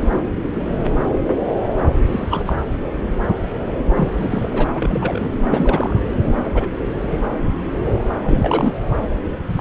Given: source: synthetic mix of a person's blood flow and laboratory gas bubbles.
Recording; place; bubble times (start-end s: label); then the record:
Doppler ultrasound of blood flow; subclavian vein
2.06-2.53 s: bubbles
3.96-4.67 s: bubbles
4.75-5.28 s: bubbles
5.50-6.02 s: bubbles
6.44-6.67 s: bubbles
7.11-7.17 s: bubbles
8.23-8.73 s: bubbles
9.56-9.61 s: bubbles
From the record:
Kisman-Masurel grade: 232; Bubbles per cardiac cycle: several, 3 to 8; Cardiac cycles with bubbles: 50 to 99%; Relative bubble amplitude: moderate (0.250 to 0.450); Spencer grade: 3 (all of the cardiac periods contain showers or single bubble signals, but not dominating or overriding the cardiac motion signals); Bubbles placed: anywhere in the cardiac cycle